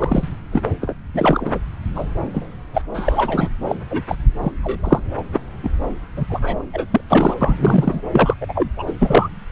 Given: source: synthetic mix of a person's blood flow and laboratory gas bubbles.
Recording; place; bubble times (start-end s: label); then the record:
Doppler ultrasound of blood flow; subclavian vein
0.00-0.28 s: bubbles
0.52-0.61 s: bubbles
0.81-0.96 s: bubbles
1.14-1.59 s: bubbles
1.95-2.06 s: bubbles
2.34-2.49 s: bubbles
2.73-2.81 s: bubbles
2.94-3.49 s: bubbles
3.67-3.75 s: bubbles
3.91-4.01 s: bubbles
4.08-4.16 s: bubbles
4.40-4.52 s: bubbles
4.62-5.00 s: bubbles
5.17-5.24 s: bubbles
5.33-5.40 s: bubbles
5.63-5.70 s: bubbles
6.17-6.26 s: bubbles
6.29-6.62 s: bubbles
6.73-6.87 s: bubbles
6.91-7.00 s: bubbles
7.09-7.34 s: bubbles
7.41-8.01 s: bubbles
8.11-8.34 s: bubbles
8.41-8.70 s: bubbles
8.76-8.84 s: bubbles
8.87-8.93 s: bubbles
8.99-9.29 s: bubbles
From the record:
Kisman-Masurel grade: 243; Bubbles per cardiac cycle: several, 3 to 8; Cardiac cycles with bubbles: 100%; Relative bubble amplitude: loud (0.450 to 0.775); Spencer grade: 3 (all of the cardiac periods contain showers or single bubble signals, but not dominating or overriding the cardiac motion signals); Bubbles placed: anywhere in the cardiac cycle